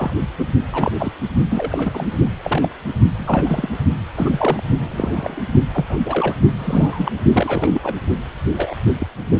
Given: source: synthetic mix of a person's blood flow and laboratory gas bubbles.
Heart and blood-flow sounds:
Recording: Doppler ultrasound of blood flow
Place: precordium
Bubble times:
0.00-0.13 s: bubbles
0.39-0.45 s: bubbles
0.70-0.94 s: bubbles
0.98-1.12 s: bubbles
1.50-2.16 s: bubbles
2.44-2.69 s: bubbles
3.16-3.69 s: bubbles
4.15-4.63 s: bubbles
4.80-5.44 s: bubbles
5.74-5.86 s: bubbles
5.89-5.97 s: bubbles
6.05-6.37 s: bubbles
6.59-7.12 s: bubbles
7.33-7.80 s: bubbles
7.83-7.96 s: bubbles
8.54-8.75 s: bubbles
8.98-9.06 s: bubbles
From the record:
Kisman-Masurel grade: 242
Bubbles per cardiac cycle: several, 3 to 8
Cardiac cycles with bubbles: 100%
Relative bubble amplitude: moderate (0.250 to 0.450)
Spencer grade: 3 (all of the cardiac periods contain showers or single bubble signals, but not dominating or overriding the cardiac motion signals)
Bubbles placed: only in the low amplitude regions of the cardiac cycle

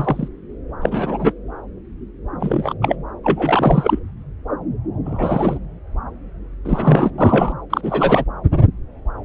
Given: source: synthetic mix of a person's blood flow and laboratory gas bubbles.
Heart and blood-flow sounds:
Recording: Doppler ultrasound of blood flow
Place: subclavian vein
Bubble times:
0.00-0.28 s: bubbles
0.81-1.33 s: bubbles
2.39-2.74 s: bubbles
2.81-2.96 s: bubbles
3.23-3.99 s: bubbles
5.05-5.58 s: bubbles
6.65-7.11 s: bubbles
7.18-7.53 s: bubbles
7.70-8.24 s: bubbles
From the record:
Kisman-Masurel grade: 223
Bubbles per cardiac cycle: several, 3 to 8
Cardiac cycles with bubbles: 10 to 50%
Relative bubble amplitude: loud (0.450 to 0.775)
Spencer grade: 2 (many but less than half of the cardiac periods contain bubble signals, singularly or in groups)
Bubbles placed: anywhere in the cardiac cycle

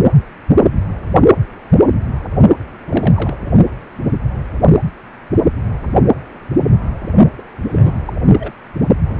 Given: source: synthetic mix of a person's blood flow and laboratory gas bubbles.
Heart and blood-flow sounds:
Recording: Doppler ultrasound of blood flow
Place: precordium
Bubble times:
2.89-3.36 s: bubbles
7.38-7.42 s: bubbles
7.62-7.95 s: bubbles
8.05-8.13 s: bubbles
8.25-8.52 s: bubbles
9.09-9.20 s: bubbles
From the record:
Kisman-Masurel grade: 232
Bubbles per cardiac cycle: several, 3 to 8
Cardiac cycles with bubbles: 50 to 99%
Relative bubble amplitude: moderate (0.250 to 0.450)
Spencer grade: 3 (all of the cardiac periods contain showers or single bubble signals, but not dominating or overriding the cardiac motion signals)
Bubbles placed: only in the low amplitude regions of the cardiac cycle

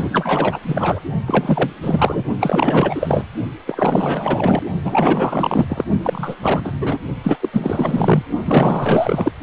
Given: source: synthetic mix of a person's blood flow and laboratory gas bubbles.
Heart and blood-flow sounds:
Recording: Doppler ultrasound of blood flow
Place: precordium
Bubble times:
0.00-0.59 s: bubbles
0.67-1.00 s: bubbles
1.26-1.70 s: bubbles
1.81-2.24 s: bubbles
2.40-3.25 s: bubbles
3.67-4.62 s: bubbles
4.84-5.66 s: bubbles
5.69-5.84 s: bubbles
6.02-6.37 s: bubbles
6.42-6.72 s: bubbles
6.80-6.98 s: bubbles
7.23-7.37 s: bubbles
7.40-7.49 s: bubbles
7.53-8.22 s: bubbles
8.45-9.32 s: bubbles
From the record:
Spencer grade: 4 (maximum detectable bubble signal sounding continuously throughout systole and diastole of every cardiac period, and overriding the amplitude of the normal cardiac signals)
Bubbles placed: only in the low amplitude regions of the cardiac cycle

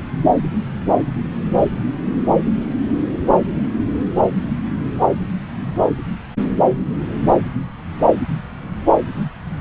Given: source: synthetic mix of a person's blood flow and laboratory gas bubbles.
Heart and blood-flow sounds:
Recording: Doppler ultrasound of blood flow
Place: subclavian vein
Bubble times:
no bubbles
From the record:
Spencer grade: 0 (complete lack of bubble signals)

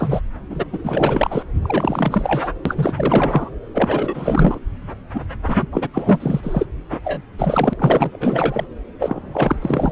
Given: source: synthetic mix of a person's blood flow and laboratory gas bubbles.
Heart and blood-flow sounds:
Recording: Doppler ultrasound of blood flow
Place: subclavian vein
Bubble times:
0.00-0.21 s: bubbles
0.49-0.65 s: bubbles
0.72-0.79 s: bubbles
0.83-1.44 s: bubbles
1.62-2.51 s: bubbles
2.65-3.50 s: bubbles
3.73-4.59 s: bubbles
5.14-5.21 s: bubbles
5.47-5.66 s: bubbles
5.72-5.88 s: bubbles
5.93-6.67 s: bubbles
6.92-6.97 s: bubbles
7.04-7.21 s: bubbles
7.38-7.74 s: bubbles
7.76-8.66 s: bubbles
8.99-9.92 s: bubbles
From the record:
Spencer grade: 4 (maximum detectable bubble signal sounding continuously throughout systole and diastole of every cardiac period, and overriding the amplitude of the normal cardiac signals)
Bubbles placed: anywhere in the cardiac cycle

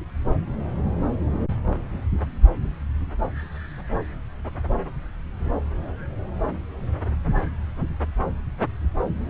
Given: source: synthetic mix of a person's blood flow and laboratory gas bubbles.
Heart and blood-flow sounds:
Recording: Doppler ultrasound of blood flow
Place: subclavian vein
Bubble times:
no bubbles
From the record:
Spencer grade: 0 (complete lack of bubble signals)

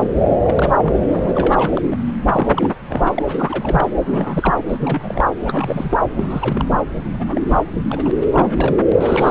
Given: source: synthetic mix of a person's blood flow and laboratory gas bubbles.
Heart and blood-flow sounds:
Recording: Doppler ultrasound of blood flow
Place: subclavian vein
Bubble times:
0.00-0.12 s: bubbles
0.44-0.70 s: bubbles
0.73-1.98 s: bubbles
2.33-2.71 s: bubbles
2.81-2.85 s: bubbles
2.88-3.23 s: bubbles
3.27-3.88 s: bubbles
4.01-4.54 s: bubbles
4.69-5.23 s: bubbles
5.38-5.96 s: bubbles
6.16-6.77 s: bubbles
7.10-7.41 s: bubbles
7.47-7.59 s: bubbles
7.88-8.12 s: bubbles
8.15-8.79 s: bubbles
8.91-9.30 s: bubbles
From the record:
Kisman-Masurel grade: 342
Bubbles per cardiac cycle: rolling drumbeat, 9 or more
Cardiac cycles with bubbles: 100%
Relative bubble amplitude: moderate (0.250 to 0.450)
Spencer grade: 3 (all of the cardiac periods contain showers or single bubble signals, but not dominating or overriding the cardiac motion signals)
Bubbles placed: anywhere in the cardiac cycle

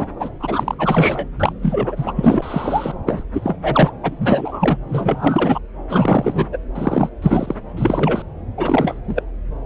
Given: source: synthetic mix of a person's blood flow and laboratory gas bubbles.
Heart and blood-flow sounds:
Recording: Doppler ultrasound of blood flow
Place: subclavian vein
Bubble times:
0.00-0.07 s: bubbles
0.20-0.30 s: bubbles
0.40-0.75 s: bubbles
0.78-1.26 s: bubbles
1.40-1.53 s: bubbles
1.62-2.98 s: bubbles
3.06-3.23 s: bubbles
3.33-3.58 s: bubbles
3.63-3.91 s: bubbles
4.03-4.77 s: bubbles
4.88-5.58 s: bubbles
5.89-6.46 s: bubbles
6.52-6.58 s: bubbles
6.75-7.09 s: bubbles
7.22-7.55 s: bubbles
7.77-8.22 s: bubbles
8.57-8.99 s: bubbles
9.07-9.23 s: bubbles
From the record:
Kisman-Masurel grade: 343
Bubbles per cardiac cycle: rolling drumbeat, 9 or more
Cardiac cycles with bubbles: 100%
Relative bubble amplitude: loud (0.450 to 0.775)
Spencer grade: 3 (all of the cardiac periods contain showers or single bubble signals, but not dominating or overriding the cardiac motion signals)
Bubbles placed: anywhere in the cardiac cycle

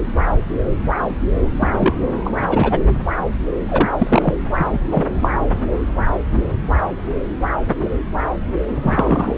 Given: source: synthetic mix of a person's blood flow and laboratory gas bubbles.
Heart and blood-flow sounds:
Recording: Doppler ultrasound of blood flow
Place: subclavian vein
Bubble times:
1.60-1.68 s: bubbles
1.80-1.93 s: bubbles
2.25-2.30 s: bubbles
2.49-2.80 s: bubbles
3.69-3.95 s: bubbles
3.98-4.34 s: bubbles
4.58-4.66 s: bubbles
4.73-4.79 s: bubbles
4.90-5.06 s: bubbles
5.21-5.29 s: bubbles
8.82-9.34 s: bubbles
From the record:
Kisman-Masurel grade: 223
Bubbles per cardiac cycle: several, 3 to 8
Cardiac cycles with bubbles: 10 to 50%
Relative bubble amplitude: loud (0.450 to 0.775)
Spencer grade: 2 (many but less than half of the cardiac periods contain bubble signals, singularly or in groups)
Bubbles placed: anywhere in the cardiac cycle

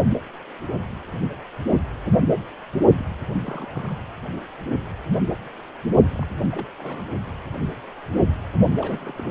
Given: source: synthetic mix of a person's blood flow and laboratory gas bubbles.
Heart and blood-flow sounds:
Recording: Doppler ultrasound of blood flow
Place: precordium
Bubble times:
2.97-3.06 s: bubbles
3.38-3.99 s: bubbles
4.33-4.42 s: bubbles
6.15-6.25 s: bubbles
6.51-6.66 s: bubbles
6.79-7.09 s: bubbles
8.77-9.31 s: bubbles
From the record:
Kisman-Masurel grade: 221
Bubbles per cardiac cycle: several, 3 to 8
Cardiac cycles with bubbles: 10 to 50%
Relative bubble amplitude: barely perceptible (0.100 to 0.250)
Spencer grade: 2 (many but less than half of the cardiac periods contain bubble signals, singularly or in groups)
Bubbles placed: only in the low amplitude regions of the cardiac cycle

